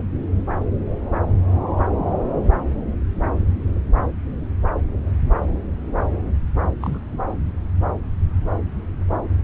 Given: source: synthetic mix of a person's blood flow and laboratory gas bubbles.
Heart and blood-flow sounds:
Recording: Doppler ultrasound of blood flow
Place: subclavian vein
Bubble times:
6.81-7.00 s: bubbles
7.12-7.17 s: bubbles
From the record:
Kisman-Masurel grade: 211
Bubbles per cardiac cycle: several, 3 to 8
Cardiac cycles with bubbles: 1 to 10%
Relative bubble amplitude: barely perceptible (0.100 to 0.250)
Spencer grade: 1 (occasional bubble signal discernible with the cardiac motion signal, with majority of cardiac periods free of bubbles)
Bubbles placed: anywhere in the cardiac cycle

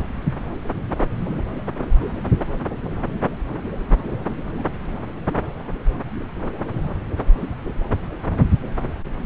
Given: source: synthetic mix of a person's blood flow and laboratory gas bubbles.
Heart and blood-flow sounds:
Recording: Doppler ultrasound of blood flow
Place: subclavian vein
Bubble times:
no bubbles
From the record:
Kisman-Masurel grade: 000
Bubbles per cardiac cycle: 0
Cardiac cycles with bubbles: 0%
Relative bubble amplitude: no bubbles discernible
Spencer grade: 0 (complete lack of bubble signals)

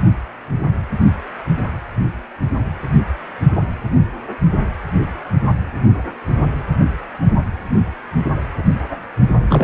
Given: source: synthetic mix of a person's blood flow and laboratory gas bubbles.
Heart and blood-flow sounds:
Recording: Doppler ultrasound of blood flow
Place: precordium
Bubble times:
9.49-9.64 s: bubbles
From the record:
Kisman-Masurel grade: 212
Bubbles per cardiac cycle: several, 3 to 8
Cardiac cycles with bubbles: 1 to 10%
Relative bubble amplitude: moderate (0.250 to 0.450)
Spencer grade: 1 (occasional bubble signal discernible with the cardiac motion signal, with majority of cardiac periods free of bubbles)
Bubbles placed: only in the low amplitude regions of the cardiac cycle

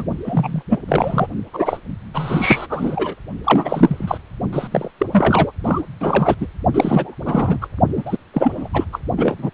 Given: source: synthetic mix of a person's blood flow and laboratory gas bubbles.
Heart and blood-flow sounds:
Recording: Doppler ultrasound of blood flow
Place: precordium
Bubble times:
0.00-0.05 s: bubbles
0.24-0.62 s: bubbles
0.70-0.79 s: bubbles
0.88-1.27 s: bubbles
1.53-1.80 s: bubbles
2.14-2.67 s: bubbles
2.69-3.15 s: bubbles
3.44-4.18 s: bubbles
4.53-4.68 s: bubbles
4.71-4.91 s: bubbles
4.99-5.07 s: bubbles
5.12-5.52 s: bubbles
5.64-5.82 s: bubbles
6.00-6.35 s: bubbles
6.40-6.47 s: bubbles
6.74-7.15 s: bubbles
7.25-7.68 s: bubbles
7.96-8.17 s: bubbles
8.34-8.70 s: bubbles
8.73-8.85 s: bubbles
8.92-8.99 s: bubbles
9.17-9.36 s: bubbles
9.38-9.50 s: bubbles
From the record:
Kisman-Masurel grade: 343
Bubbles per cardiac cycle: rolling drumbeat, 9 or more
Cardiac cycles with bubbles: 100%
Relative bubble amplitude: loud (0.450 to 0.775)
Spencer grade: 3 (all of the cardiac periods contain showers or single bubble signals, but not dominating or overriding the cardiac motion signals)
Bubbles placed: only in the low amplitude regions of the cardiac cycle

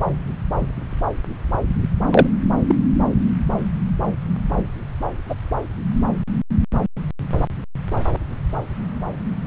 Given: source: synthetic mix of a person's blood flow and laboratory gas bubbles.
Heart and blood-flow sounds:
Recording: Doppler ultrasound of blood flow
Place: subclavian vein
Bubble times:
2.11-2.27 s: bubbles
2.67-2.75 s: bubbles
5.30-5.34 s: bubbles
From the record:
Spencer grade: 2 (many but less than half of the cardiac periods contain bubble signals, singularly or in groups)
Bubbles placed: anywhere in the cardiac cycle

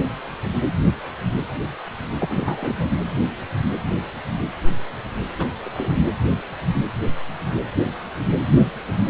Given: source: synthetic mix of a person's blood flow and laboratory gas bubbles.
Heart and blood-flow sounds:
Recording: Doppler ultrasound of blood flow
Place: precordium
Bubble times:
2.20-2.91 s: bubbles
5.38-5.48 s: bubbles
5.63-6.02 s: bubbles
From the record:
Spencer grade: 1 (occasional bubble signal discernible with the cardiac motion signal, with majority of cardiac periods free of bubbles)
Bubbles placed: anywhere in the cardiac cycle

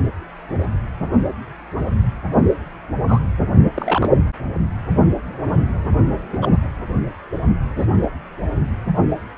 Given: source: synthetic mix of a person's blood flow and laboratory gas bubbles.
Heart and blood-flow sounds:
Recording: Doppler ultrasound of blood flow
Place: precordium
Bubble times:
3.08-3.19 s: bubbles
3.74-4.12 s: bubbles
6.32-6.37 s: bubbles
6.41-6.47 s: bubbles
7.75-7.87 s: bubbles
8.02-8.07 s: bubbles
From the record:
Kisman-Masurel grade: 123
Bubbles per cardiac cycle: 1 to 2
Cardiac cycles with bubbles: 10 to 50%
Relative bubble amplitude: loud (0.450 to 0.775)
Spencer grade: 2 (many but less than half of the cardiac periods contain bubble signals, singularly or in groups)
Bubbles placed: only in the low amplitude regions of the cardiac cycle

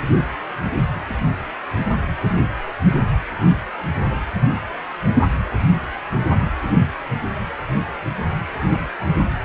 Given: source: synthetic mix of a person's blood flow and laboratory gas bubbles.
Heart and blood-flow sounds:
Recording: Doppler ultrasound of blood flow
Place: precordium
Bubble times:
8.70-8.79 s: bubbles
From the record:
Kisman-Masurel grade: 111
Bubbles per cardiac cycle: 1 to 2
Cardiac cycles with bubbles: 1 to 10%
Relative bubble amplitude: barely perceptible (0.100 to 0.250)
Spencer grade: 1 (occasional bubble signal discernible with the cardiac motion signal, with majority of cardiac periods free of bubbles)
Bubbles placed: anywhere in the cardiac cycle

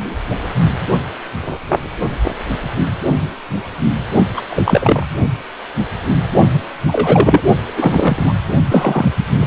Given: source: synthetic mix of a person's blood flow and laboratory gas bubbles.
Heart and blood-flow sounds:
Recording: Doppler ultrasound of blood flow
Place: precordium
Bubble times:
4.37-4.41 s: bubbles
4.50-5.06 s: bubbles
6.88-7.41 s: bubbles
7.76-8.33 s: bubbles
8.68-9.08 s: bubbles
9.39-9.47 s: bubbles
From the record:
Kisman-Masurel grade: 223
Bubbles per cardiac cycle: several, 3 to 8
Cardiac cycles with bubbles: 10 to 50%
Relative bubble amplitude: loud (0.450 to 0.775)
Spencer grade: 2 (many but less than half of the cardiac periods contain bubble signals, singularly or in groups)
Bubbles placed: only in the low amplitude regions of the cardiac cycle

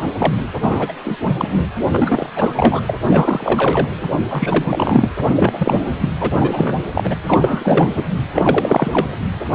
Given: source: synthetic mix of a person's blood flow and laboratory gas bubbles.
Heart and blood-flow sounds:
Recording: Doppler ultrasound of blood flow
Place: precordium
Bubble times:
0.00-0.13 s: bubbles
0.18-0.35 s: bubbles
0.62-0.92 s: bubbles
1.04-1.17 s: bubbles
1.25-1.68 s: bubbles
1.91-2.27 s: bubbles
2.35-2.81 s: bubbles
2.88-3.00 s: bubbles
3.08-3.88 s: bubbles
4.30-4.64 s: bubbles
4.67-5.08 s: bubbles
5.35-5.80 s: bubbles
5.86-5.96 s: bubbles
6.00-6.09 s: bubbles
6.20-6.84 s: bubbles
6.93-7.15 s: bubbles
7.27-8.04 s: bubbles
8.34-9.06 s: bubbles
From the record:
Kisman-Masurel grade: 333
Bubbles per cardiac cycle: rolling drumbeat, 9 or more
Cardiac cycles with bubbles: 50 to 99%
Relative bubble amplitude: loud (0.450 to 0.775)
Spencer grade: 3 (all of the cardiac periods contain showers or single bubble signals, but not dominating or overriding the cardiac motion signals)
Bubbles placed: anywhere in the cardiac cycle

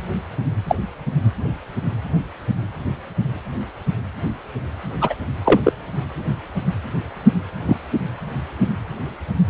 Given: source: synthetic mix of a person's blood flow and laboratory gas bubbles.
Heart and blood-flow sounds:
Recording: Doppler ultrasound of blood flow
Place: precordium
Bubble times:
0.67-0.75 s: bubbles
5.01-5.15 s: bubbles
5.45-5.60 s: bubbles
5.63-5.73 s: bubbles
7.66-7.77 s: bubbles
From the record:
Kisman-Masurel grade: 123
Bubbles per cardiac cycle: 1 to 2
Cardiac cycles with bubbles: 10 to 50%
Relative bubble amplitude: loud (0.450 to 0.775)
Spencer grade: 2 (many but less than half of the cardiac periods contain bubble signals, singularly or in groups)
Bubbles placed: anywhere in the cardiac cycle

